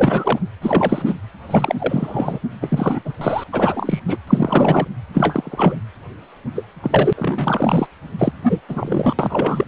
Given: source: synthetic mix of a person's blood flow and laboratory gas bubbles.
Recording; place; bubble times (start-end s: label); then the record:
Doppler ultrasound of blood flow; precordium
0.00-0.39 s: bubbles
0.61-1.15 s: bubbles
1.48-1.75 s: bubbles
1.78-2.39 s: bubbles
2.60-3.00 s: bubbles
3.04-3.13 s: bubbles
3.21-3.44 s: bubbles
3.52-4.00 s: bubbles
4.07-4.17 s: bubbles
4.27-4.88 s: bubbles
5.13-5.76 s: bubbles
6.55-6.65 s: bubbles
6.82-7.13 s: bubbles
7.15-7.86 s: bubbles
8.18-8.33 s: bubbles
8.43-8.60 s: bubbles
8.69-9.15 s: bubbles
9.19-9.65 s: bubbles
From the record:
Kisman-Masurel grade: 343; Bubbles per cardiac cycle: rolling drumbeat, 9 or more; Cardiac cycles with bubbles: 100%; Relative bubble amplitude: loud (0.450 to 0.775); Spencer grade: 3 (all of the cardiac periods contain showers or single bubble signals, but not dominating or overriding the cardiac motion signals); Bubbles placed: anywhere in the cardiac cycle